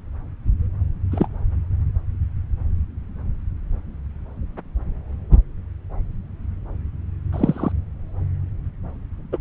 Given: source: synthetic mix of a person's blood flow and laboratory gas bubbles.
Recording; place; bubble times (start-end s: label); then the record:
Doppler ultrasound of blood flow; subclavian vein
1.11-1.28 s: bubbles
7.33-7.72 s: bubbles
9.32-9.37 s: bubbles
From the record:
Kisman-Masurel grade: 123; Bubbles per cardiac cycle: 1 to 2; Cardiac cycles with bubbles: 10 to 50%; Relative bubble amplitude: loud (0.450 to 0.775); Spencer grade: 2 (many but less than half of the cardiac periods contain bubble signals, singularly or in groups); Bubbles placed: anywhere in the cardiac cycle